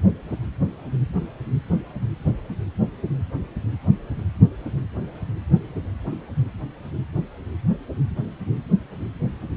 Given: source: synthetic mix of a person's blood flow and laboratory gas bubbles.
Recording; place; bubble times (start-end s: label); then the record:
Doppler ultrasound of blood flow; precordium
no bubbles
From the record:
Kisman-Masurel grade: 000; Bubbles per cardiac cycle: 0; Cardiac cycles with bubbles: 0%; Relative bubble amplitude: no bubbles discernible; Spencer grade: 0 (complete lack of bubble signals)